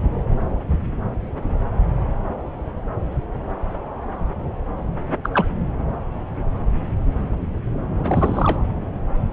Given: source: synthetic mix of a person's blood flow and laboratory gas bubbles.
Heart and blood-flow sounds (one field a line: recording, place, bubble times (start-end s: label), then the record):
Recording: Doppler ultrasound of blood flow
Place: subclavian vein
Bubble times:
5.23-5.29 s: bubbles
5.33-5.46 s: bubbles
8.03-8.60 s: bubbles
From the record:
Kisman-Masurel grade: 222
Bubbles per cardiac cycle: several, 3 to 8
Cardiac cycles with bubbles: 10 to 50%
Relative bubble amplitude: moderate (0.250 to 0.450)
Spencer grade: 2 (many but less than half of the cardiac periods contain bubble signals, singularly or in groups)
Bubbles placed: anywhere in the cardiac cycle